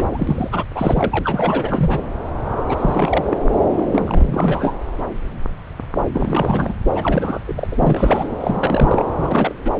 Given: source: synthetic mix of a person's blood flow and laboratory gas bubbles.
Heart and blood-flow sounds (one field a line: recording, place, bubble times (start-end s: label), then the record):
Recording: Doppler ultrasound of blood flow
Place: subclavian vein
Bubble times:
0.00-0.04 s: bubbles
0.12-0.64 s: bubbles
0.74-1.19 s: bubbles
1.23-1.99 s: bubbles
2.69-3.38 s: bubbles
3.76-3.85 s: bubbles
3.92-4.75 s: bubbles
6.13-6.73 s: bubbles
6.89-7.39 s: bubbles
7.47-7.53 s: bubbles
7.55-7.65 s: bubbles
7.71-8.29 s: bubbles
8.40-9.04 s: bubbles
9.15-9.54 s: bubbles
9.65-9.71 s: bubbles
From the record:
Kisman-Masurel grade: 332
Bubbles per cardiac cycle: rolling drumbeat, 9 or more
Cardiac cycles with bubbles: 50 to 99%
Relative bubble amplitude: moderate (0.250 to 0.450)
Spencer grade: 3 (all of the cardiac periods contain showers or single bubble signals, but not dominating or overriding the cardiac motion signals)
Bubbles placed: anywhere in the cardiac cycle